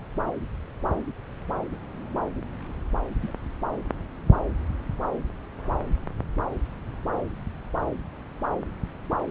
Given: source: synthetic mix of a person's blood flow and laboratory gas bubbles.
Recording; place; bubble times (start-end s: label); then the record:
Doppler ultrasound of blood flow; subclavian vein
3.22-3.32 s: bubbles
From the record:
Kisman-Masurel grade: 121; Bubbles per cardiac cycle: 1 to 2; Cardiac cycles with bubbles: 10 to 50%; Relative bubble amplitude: barely perceptible (0.100 to 0.250); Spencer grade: 2 (many but less than half of the cardiac periods contain bubble signals, singularly or in groups); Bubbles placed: anywhere in the cardiac cycle